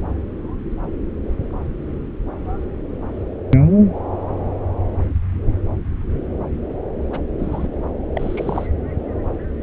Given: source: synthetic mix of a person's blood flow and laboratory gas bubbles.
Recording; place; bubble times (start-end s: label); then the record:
Doppler ultrasound of blood flow; subclavian vein
7.11-7.21 s: bubbles
7.39-7.67 s: bubbles
8.15-8.67 s: bubbles
From the record:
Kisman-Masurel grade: 222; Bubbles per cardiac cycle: several, 3 to 8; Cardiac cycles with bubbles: 10 to 50%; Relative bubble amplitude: moderate (0.250 to 0.450); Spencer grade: 2 (many but less than half of the cardiac periods contain bubble signals, singularly or in groups); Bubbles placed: anywhere in the cardiac cycle